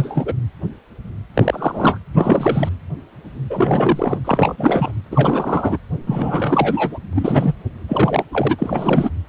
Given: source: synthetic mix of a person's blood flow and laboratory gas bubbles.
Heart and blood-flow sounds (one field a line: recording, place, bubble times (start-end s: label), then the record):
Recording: Doppler ultrasound of blood flow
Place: precordium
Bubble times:
0.00-0.34 s: bubbles
1.34-1.99 s: bubbles
2.14-2.69 s: bubbles
3.50-4.20 s: bubbles
4.24-4.92 s: bubbles
5.11-5.77 s: bubbles
6.06-6.98 s: bubbles
7.12-7.53 s: bubbles
7.88-8.25 s: bubbles
8.33-8.54 s: bubbles
8.58-9.10 s: bubbles
From the record:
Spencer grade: 3 (all of the cardiac periods contain showers or single bubble signals, but not dominating or overriding the cardiac motion signals)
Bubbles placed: anywhere in the cardiac cycle